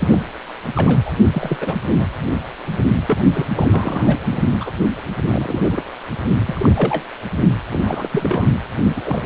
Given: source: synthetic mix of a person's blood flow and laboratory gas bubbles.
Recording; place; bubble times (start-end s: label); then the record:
Doppler ultrasound of blood flow; precordium
0.00-0.20 s: bubbles
0.75-1.02 s: bubbles
1.05-1.11 s: bubbles
1.32-1.56 s: bubbles
1.60-1.76 s: bubbles
1.99-2.06 s: bubbles
3.06-3.18 s: bubbles
3.33-3.47 s: bubbles
3.56-4.16 s: bubbles
4.31-4.39 s: bubbles
4.60-4.71 s: bubbles
5.21-5.82 s: bubbles
6.46-7.04 s: bubbles
7.71-8.08 s: bubbles
8.12-8.50 s: bubbles
8.96-9.01 s: bubbles
9.04-9.26 s: bubbles
From the record:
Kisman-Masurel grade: 242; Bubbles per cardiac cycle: several, 3 to 8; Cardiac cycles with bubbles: 100%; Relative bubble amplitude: moderate (0.250 to 0.450); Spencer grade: 3 (all of the cardiac periods contain showers or single bubble signals, but not dominating or overriding the cardiac motion signals); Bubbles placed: only in the low amplitude regions of the cardiac cycle